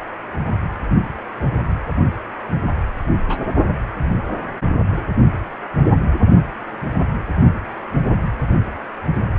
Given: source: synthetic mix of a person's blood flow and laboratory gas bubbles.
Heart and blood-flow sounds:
Doppler ultrasound of blood flow; precordium
3.28-3.46 s: bubbles
From the record:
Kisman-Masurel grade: 111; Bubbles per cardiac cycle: 1 to 2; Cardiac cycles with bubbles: 1 to 10%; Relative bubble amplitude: barely perceptible (0.100 to 0.250); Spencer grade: 1 (occasional bubble signal discernible with the cardiac motion signal, with majority of cardiac periods free of bubbles); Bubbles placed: anywhere in the cardiac cycle

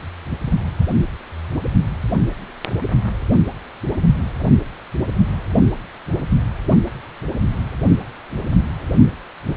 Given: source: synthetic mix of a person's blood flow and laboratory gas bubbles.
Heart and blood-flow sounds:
Doppler ultrasound of blood flow; precordium
no bubbles
From the record:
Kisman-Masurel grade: 000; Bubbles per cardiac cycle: 0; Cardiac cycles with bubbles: 0%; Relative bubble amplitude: no bubbles discernible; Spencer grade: 0 (complete lack of bubble signals)

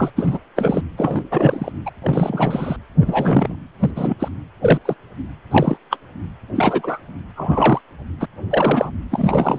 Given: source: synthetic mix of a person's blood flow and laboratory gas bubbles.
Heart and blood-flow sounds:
Doppler ultrasound of blood flow; precordium
0.00-0.11 s: bubbles
0.16-0.38 s: bubbles
0.57-0.81 s: bubbles
0.97-1.24 s: bubbles
1.31-1.72 s: bubbles
1.85-1.90 s: bubbles
2.02-2.76 s: bubbles
3.00-3.56 s: bubbles
3.79-3.90 s: bubbles
3.95-4.16 s: bubbles
4.19-4.28 s: bubbles
4.62-4.78 s: bubbles
4.85-4.94 s: bubbles
5.50-5.77 s: bubbles
5.90-5.96 s: bubbles
6.55-6.99 s: bubbles
7.35-7.81 s: bubbles
8.20-8.25 s: bubbles
8.50-8.90 s: bubbles
9.11-9.59 s: bubbles
From the record:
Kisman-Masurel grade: 243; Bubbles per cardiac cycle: several, 3 to 8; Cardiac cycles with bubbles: 100%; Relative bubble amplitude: loud (0.450 to 0.775); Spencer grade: 3 (all of the cardiac periods contain showers or single bubble signals, but not dominating or overriding the cardiac motion signals); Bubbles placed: anywhere in the cardiac cycle

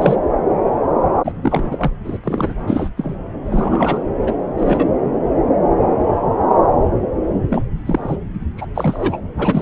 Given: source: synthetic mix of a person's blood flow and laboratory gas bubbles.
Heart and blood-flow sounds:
Doppler ultrasound of blood flow; subclavian vein
0.01-0.16 s: bubbles
1.24-1.32 s: bubbles
1.42-1.90 s: bubbles
2.04-2.17 s: bubbles
2.23-2.53 s: bubbles
2.67-2.90 s: bubbles
2.97-3.15 s: bubbles
3.50-4.00 s: bubbles
4.27-4.31 s: bubbles
4.58-4.87 s: bubbles
7.50-7.64 s: bubbles
7.85-8.17 s: bubbles
8.57-8.67 s: bubbles
8.75-9.20 s: bubbles
9.37-9.61 s: bubbles
From the record:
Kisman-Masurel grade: 232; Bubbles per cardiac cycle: several, 3 to 8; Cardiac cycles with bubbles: 50 to 99%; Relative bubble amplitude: moderate (0.250 to 0.450); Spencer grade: 3 (all of the cardiac periods contain showers or single bubble signals, but not dominating or overriding the cardiac motion signals); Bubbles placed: anywhere in the cardiac cycle

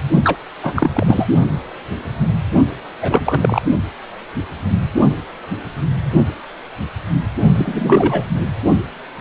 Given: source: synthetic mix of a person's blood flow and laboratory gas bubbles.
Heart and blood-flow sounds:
Doppler ultrasound of blood flow; precordium
0.24-0.38 s: bubbles
0.63-0.72 s: bubbles
0.75-1.27 s: bubbles
3.01-3.60 s: bubbles
7.55-8.23 s: bubbles
8.33-8.50 s: bubbles
From the record:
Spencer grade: 2 (many but less than half of the cardiac periods contain bubble signals, singularly or in groups); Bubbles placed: only in the low amplitude regions of the cardiac cycle

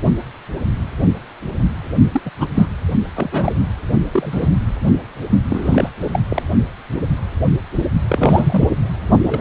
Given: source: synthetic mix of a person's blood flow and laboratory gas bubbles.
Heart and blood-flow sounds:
Doppler ultrasound of blood flow; precordium
2.12-2.22 s: bubbles
2.25-2.31 s: bubbles
2.38-2.47 s: bubbles
2.55-2.67 s: bubbles
3.15-3.52 s: bubbles
4.12-4.48 s: bubbles
4.82-4.92 s: bubbles
5.50-5.90 s: bubbles
6.00-6.20 s: bubbles
6.29-6.42 s: bubbles
8.08-8.69 s: bubbles
9.26-9.41 s: bubbles
From the record:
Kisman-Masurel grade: 232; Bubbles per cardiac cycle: several, 3 to 8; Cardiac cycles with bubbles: 50 to 99%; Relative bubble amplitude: moderate (0.250 to 0.450); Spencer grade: 3 (all of the cardiac periods contain showers or single bubble signals, but not dominating or overriding the cardiac motion signals); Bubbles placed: only in the low amplitude regions of the cardiac cycle

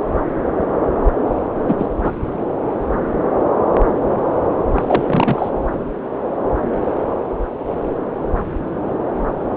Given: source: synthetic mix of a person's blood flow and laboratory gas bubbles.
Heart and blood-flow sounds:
Doppler ultrasound of blood flow; subclavian vein
1.68-1.75 s: bubbles
1.78-1.86 s: bubbles
2.03-2.12 s: bubbles
4.71-5.50 s: bubbles
From the record:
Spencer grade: 2 (many but less than half of the cardiac periods contain bubble signals, singularly or in groups); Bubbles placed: anywhere in the cardiac cycle

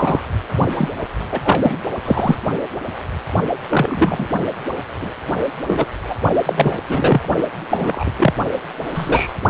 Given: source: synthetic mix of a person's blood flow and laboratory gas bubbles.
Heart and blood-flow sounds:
Doppler ultrasound of blood flow; precordium
0.00-0.19 s: bubbles
0.71-0.88 s: bubbles
1.32-1.41 s: bubbles
1.44-1.76 s: bubbles
2.04-2.35 s: bubbles
3.70-4.29 s: bubbles
5.00-5.12 s: bubbles
5.67-5.86 s: bubbles
6.09-6.15 s: bubbles
6.46-6.77 s: bubbles
6.88-7.28 s: bubbles
7.70-8.12 s: bubbles
8.18-8.33 s: bubbles
8.94-9.34 s: bubbles
From the record:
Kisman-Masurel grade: 243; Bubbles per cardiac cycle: several, 3 to 8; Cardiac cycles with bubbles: 100%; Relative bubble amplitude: loud (0.450 to 0.775); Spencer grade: 3 (all of the cardiac periods contain showers or single bubble signals, but not dominating or overriding the cardiac motion signals); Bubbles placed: only in the low amplitude regions of the cardiac cycle

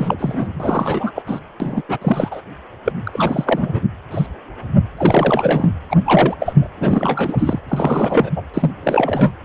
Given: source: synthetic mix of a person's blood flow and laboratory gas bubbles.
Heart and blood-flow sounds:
Doppler ultrasound of blood flow; precordium
0.00-0.16 s: bubbles
0.18-0.48 s: bubbles
0.59-1.11 s: bubbles
1.15-1.22 s: bubbles
1.26-1.40 s: bubbles
1.60-1.82 s: bubbles
1.88-1.98 s: bubbles
2.02-2.41 s: bubbles
2.85-2.92 s: bubbles
3.06-3.80 s: bubbles
4.11-4.27 s: bubbles
4.97-5.70 s: bubbles
5.90-5.97 s: bubbles
6.06-6.35 s: bubbles
6.40-6.68 s: bubbles
6.79-7.60 s: bubbles
7.68-8.30 s: bubbles
8.36-8.42 s: bubbles
8.54-8.71 s: bubbles
8.83-9.34 s: bubbles
From the record:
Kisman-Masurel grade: 333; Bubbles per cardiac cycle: rolling drumbeat, 9 or more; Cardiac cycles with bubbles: 50 to 99%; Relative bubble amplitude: loud (0.450 to 0.775); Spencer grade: 3 (all of the cardiac periods contain showers or single bubble signals, but not dominating or overriding the cardiac motion signals); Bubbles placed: anywhere in the cardiac cycle

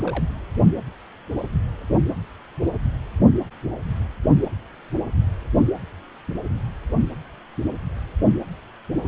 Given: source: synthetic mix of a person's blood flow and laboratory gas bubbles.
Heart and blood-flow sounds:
Doppler ultrasound of blood flow; precordium
0.00-0.24 s: bubbles
From the record:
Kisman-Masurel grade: 211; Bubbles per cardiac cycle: several, 3 to 8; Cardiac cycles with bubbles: 1 to 10%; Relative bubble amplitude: barely perceptible (0.100 to 0.250); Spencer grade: 1 (occasional bubble signal discernible with the cardiac motion signal, with majority of cardiac periods free of bubbles); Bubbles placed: anywhere in the cardiac cycle

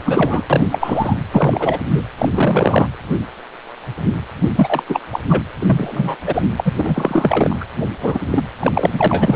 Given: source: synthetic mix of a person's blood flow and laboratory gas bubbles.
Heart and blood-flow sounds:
Doppler ultrasound of blood flow; precordium
0.04-0.43 s: bubbles
0.49-0.67 s: bubbles
0.71-1.15 s: bubbles
1.31-1.79 s: bubbles
1.83-2.02 s: bubbles
2.18-2.29 s: bubbles
2.33-2.87 s: bubbles
4.55-4.82 s: bubbles
4.88-5.00 s: bubbles
5.10-5.19 s: bubbles
5.29-5.43 s: bubbles
5.56-5.58 s: bubbles
5.60-6.16 s: bubbles
6.26-6.42 s: bubbles
6.57-6.73 s: bubbles
6.78-7.56 s: bubbles
7.60-7.66 s: bubbles
8.01-8.20 s: bubbles
8.26-8.44 s: bubbles
8.61-9.36 s: bubbles
From the record:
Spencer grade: 3 (all of the cardiac periods contain showers or single bubble signals, but not dominating or overriding the cardiac motion signals); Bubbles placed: anywhere in the cardiac cycle

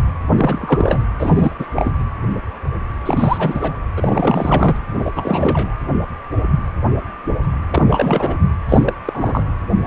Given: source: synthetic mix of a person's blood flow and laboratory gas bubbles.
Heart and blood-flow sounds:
Doppler ultrasound of blood flow; precordium
0.30-1.03 s: bubbles
1.19-1.56 s: bubbles
1.58-1.66 s: bubbles
1.74-1.93 s: bubbles
3.06-3.80 s: bubbles
3.96-4.77 s: bubbles
4.95-5.75 s: bubbles
7.70-7.83 s: bubbles
7.88-8.35 s: bubbles
8.68-8.93 s: bubbles
9.05-9.43 s: bubbles
From the record:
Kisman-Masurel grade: 333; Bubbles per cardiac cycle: rolling drumbeat, 9 or more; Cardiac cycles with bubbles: 50 to 99%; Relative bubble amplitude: loud (0.450 to 0.775); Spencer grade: 3 (all of the cardiac periods contain showers or single bubble signals, but not dominating or overriding the cardiac motion signals); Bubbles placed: anywhere in the cardiac cycle

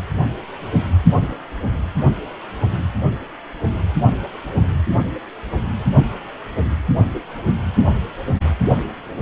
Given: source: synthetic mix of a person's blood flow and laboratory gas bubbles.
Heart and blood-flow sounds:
Doppler ultrasound of blood flow; precordium
no bubbles
From the record:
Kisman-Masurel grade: 000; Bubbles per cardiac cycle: 0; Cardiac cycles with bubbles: 0%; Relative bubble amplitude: no bubbles discernible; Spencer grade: 0 (complete lack of bubble signals)

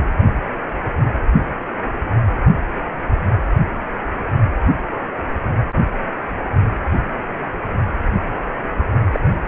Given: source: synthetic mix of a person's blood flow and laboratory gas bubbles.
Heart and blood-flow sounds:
Doppler ultrasound of blood flow; precordium
9.12-9.20 s: bubbles
From the record:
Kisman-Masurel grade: 122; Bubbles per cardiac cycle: 1 to 2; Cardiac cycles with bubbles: 10 to 50%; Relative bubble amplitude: moderate (0.250 to 0.450); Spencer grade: 2 (many but less than half of the cardiac periods contain bubble signals, singularly or in groups); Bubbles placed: only in the low amplitude regions of the cardiac cycle

